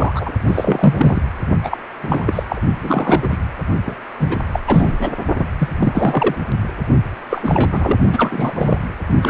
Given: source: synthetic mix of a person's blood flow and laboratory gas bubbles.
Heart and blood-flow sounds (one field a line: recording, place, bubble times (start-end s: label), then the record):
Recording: Doppler ultrasound of blood flow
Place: precordium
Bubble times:
0.00-0.33 s: bubbles
0.48-1.22 s: bubbles
1.63-1.78 s: bubbles
2.01-2.43 s: bubbles
2.50-2.62 s: bubbles
2.81-3.28 s: bubbles
3.31-3.38 s: bubbles
3.86-3.95 s: bubbles
4.19-4.37 s: bubbles
4.53-4.60 s: bubbles
4.67-5.11 s: bubbles
5.37-5.46 s: bubbles
5.58-5.68 s: bubbles
5.80-6.35 s: bubbles
7.29-7.97 s: bubbles
8.12-8.79 s: bubbles
9.21-9.30 s: bubbles
From the record:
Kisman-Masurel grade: 343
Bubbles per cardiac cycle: rolling drumbeat, 9 or more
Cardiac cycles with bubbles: 100%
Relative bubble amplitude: loud (0.450 to 0.775)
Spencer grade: 3 (all of the cardiac periods contain showers or single bubble signals, but not dominating or overriding the cardiac motion signals)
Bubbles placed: only in the low amplitude regions of the cardiac cycle